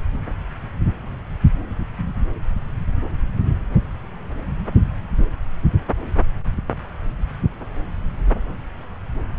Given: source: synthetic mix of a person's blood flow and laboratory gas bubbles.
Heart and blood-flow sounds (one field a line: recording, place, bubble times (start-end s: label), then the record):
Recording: Doppler ultrasound of blood flow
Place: subclavian vein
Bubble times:
no bubbles
From the record:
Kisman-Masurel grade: 000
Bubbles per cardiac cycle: 0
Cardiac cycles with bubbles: 0%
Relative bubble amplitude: no bubbles discernible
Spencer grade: 0 (complete lack of bubble signals)